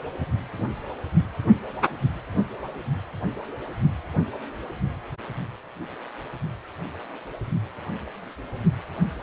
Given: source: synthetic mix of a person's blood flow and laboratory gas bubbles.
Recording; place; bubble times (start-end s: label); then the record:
Doppler ultrasound of blood flow; precordium
no bubbles
From the record:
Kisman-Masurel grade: 000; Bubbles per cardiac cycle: 0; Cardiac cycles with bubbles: 0%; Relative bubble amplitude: no bubbles discernible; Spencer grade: 0 (complete lack of bubble signals)